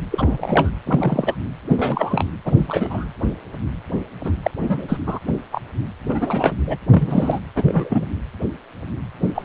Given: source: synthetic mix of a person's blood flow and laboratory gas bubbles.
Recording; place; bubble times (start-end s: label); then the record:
Doppler ultrasound of blood flow; precordium
0.11-0.38 s: bubbles
0.41-0.70 s: bubbles
0.86-1.35 s: bubbles
1.70-2.30 s: bubbles
2.45-2.52 s: bubbles
2.56-3.08 s: bubbles
4.23-4.32 s: bubbles
4.42-4.50 s: bubbles
4.61-4.97 s: bubbles
5.06-5.19 s: bubbles
5.27-5.33 s: bubbles
5.51-5.61 s: bubbles
6.08-6.52 s: bubbles
6.67-6.76 s: bubbles
6.91-7.39 s: bubbles
7.55-8.05 s: bubbles
9.22-9.32 s: bubbles
9.35-9.45 s: bubbles
From the record:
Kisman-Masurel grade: 232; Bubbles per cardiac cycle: several, 3 to 8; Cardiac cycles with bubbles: 50 to 99%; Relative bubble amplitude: moderate (0.250 to 0.450); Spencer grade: 3 (all of the cardiac periods contain showers or single bubble signals, but not dominating or overriding the cardiac motion signals); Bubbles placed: anywhere in the cardiac cycle